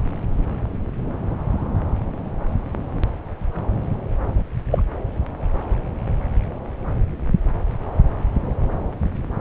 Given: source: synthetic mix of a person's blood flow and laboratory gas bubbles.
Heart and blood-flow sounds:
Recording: Doppler ultrasound of blood flow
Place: subclavian vein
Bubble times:
4.71-4.83 s: bubbles
From the record:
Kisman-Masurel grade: 113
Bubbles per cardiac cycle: 1 to 2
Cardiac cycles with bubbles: 1 to 10%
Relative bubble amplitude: loud (0.450 to 0.775)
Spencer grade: 1 (occasional bubble signal discernible with the cardiac motion signal, with majority of cardiac periods free of bubbles)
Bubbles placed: anywhere in the cardiac cycle

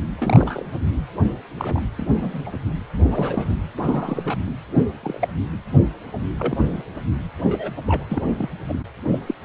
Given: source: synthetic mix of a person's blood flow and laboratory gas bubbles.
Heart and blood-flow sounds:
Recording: Doppler ultrasound of blood flow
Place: precordium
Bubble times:
0.17-0.66 s: bubbles
1.58-1.80 s: bubbles
1.97-2.57 s: bubbles
3.09-3.54 s: bubbles
3.77-4.38 s: bubbles
5.03-5.28 s: bubbles
6.39-6.57 s: bubbles
6.60-6.82 s: bubbles
7.43-7.72 s: bubbles
7.86-8.04 s: bubbles
8.10-8.48 s: bubbles
8.68-8.73 s: bubbles
9.04-9.20 s: bubbles
9.26-9.34 s: bubbles
9.42-9.45 s: bubbles
From the record:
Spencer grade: 3 (all of the cardiac periods contain showers or single bubble signals, but not dominating or overriding the cardiac motion signals)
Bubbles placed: anywhere in the cardiac cycle

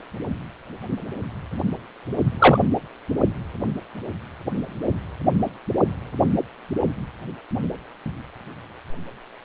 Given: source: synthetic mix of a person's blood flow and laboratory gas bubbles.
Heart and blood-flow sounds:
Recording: Doppler ultrasound of blood flow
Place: precordium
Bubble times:
2.39-2.60 s: bubbles
From the record:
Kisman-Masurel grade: 113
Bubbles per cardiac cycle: 1 to 2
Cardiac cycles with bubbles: 1 to 10%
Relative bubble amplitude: loud (0.450 to 0.775)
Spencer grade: 1 (occasional bubble signal discernible with the cardiac motion signal, with majority of cardiac periods free of bubbles)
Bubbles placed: anywhere in the cardiac cycle

